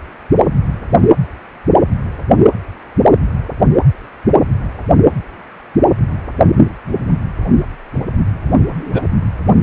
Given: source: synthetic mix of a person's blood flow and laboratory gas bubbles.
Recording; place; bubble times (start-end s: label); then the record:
Doppler ultrasound of blood flow; precordium
0.38-0.44 s: bubbles
8.80-9.05 s: bubbles
From the record:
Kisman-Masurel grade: 112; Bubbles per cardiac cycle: 1 to 2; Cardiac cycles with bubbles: 1 to 10%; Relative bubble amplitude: moderate (0.250 to 0.450); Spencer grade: 1 (occasional bubble signal discernible with the cardiac motion signal, with majority of cardiac periods free of bubbles); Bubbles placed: anywhere in the cardiac cycle